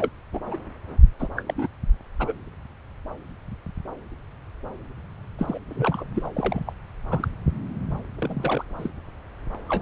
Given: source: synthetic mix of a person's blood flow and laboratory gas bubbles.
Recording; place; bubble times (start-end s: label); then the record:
Doppler ultrasound of blood flow; subclavian vein
0.00-0.09 s: bubbles
0.34-0.41 s: bubbles
0.46-0.58 s: bubbles
1.19-1.29 s: bubbles
1.36-1.42 s: bubbles
1.46-1.54 s: bubbles
1.57-1.67 s: bubbles
2.19-2.33 s: bubbles
5.38-5.58 s: bubbles
5.69-6.04 s: bubbles
6.14-6.73 s: bubbles
7.11-7.28 s: bubbles
8.19-8.63 s: bubbles
8.78-8.90 s: bubbles
9.69-9.81 s: bubbles
From the record:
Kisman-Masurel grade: 232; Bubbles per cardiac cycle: several, 3 to 8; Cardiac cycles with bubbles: 50 to 99%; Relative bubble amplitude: moderate (0.250 to 0.450); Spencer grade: 3 (all of the cardiac periods contain showers or single bubble signals, but not dominating or overriding the cardiac motion signals); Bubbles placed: anywhere in the cardiac cycle